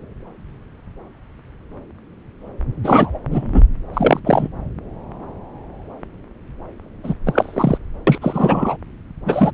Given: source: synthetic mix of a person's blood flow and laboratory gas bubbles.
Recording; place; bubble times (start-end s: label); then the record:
Doppler ultrasound of blood flow; subclavian vein
2.83-3.19 s: bubbles
3.31-3.64 s: bubbles
3.93-4.19 s: bubbles
4.23-4.48 s: bubbles
7.03-7.13 s: bubbles
7.26-7.78 s: bubbles
8.07-8.18 s: bubbles
8.21-8.76 s: bubbles
9.25-9.51 s: bubbles
From the record:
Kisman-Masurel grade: 223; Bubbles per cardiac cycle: several, 3 to 8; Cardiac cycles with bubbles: 10 to 50%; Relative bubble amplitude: loud (0.450 to 0.775); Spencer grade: 2 (many but less than half of the cardiac periods contain bubble signals, singularly or in groups); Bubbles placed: anywhere in the cardiac cycle